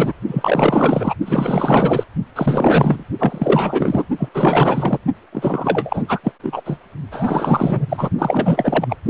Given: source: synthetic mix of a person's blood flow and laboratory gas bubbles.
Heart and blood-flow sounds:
Doppler ultrasound of blood flow; precordium
0.00-0.12 s: bubbles
0.27-1.14 s: bubbles
1.26-2.05 s: bubbles
2.36-3.04 s: bubbles
3.19-4.05 s: bubbles
4.17-4.29 s: bubbles
4.34-4.98 s: bubbles
5.32-6.05 s: bubbles
6.08-6.19 s: bubbles
6.23-6.31 s: bubbles
6.42-6.61 s: bubbles
6.65-6.77 s: bubbles
7.11-7.86 s: bubbles
7.89-8.10 s: bubbles
8.18-8.96 s: bubbles
From the record:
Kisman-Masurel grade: 444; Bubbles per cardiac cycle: continuous sound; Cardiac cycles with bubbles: 100%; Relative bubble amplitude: maximal (0.775 to 0.999); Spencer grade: 4 (maximum detectable bubble signal sounding continuously throughout systole and diastole of every cardiac period, and overriding the amplitude of the normal cardiac signals); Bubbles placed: only in the low amplitude regions of the cardiac cycle

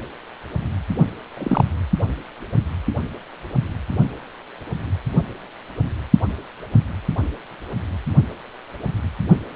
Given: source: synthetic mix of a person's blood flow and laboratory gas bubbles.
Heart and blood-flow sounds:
Doppler ultrasound of blood flow; precordium
1.37-1.64 s: bubbles
From the record:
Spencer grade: 1 (occasional bubble signal discernible with the cardiac motion signal, with majority of cardiac periods free of bubbles); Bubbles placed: only in the low amplitude regions of the cardiac cycle

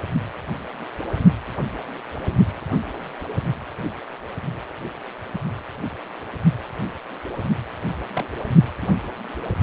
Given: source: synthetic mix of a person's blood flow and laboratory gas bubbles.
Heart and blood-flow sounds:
Doppler ultrasound of blood flow; precordium
8.13-8.24 s: bubbles
8.81-8.88 s: bubbles
From the record:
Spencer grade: 2 (many but less than half of the cardiac periods contain bubble signals, singularly or in groups); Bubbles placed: anywhere in the cardiac cycle

